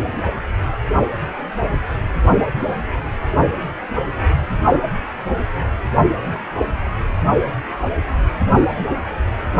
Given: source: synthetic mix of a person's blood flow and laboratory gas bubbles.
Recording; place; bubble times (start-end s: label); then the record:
Doppler ultrasound of blood flow; precordium
no bubbles
From the record:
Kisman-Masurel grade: 000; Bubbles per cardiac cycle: 0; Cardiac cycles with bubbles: 0%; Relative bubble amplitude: no bubbles discernible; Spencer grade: 0 (complete lack of bubble signals)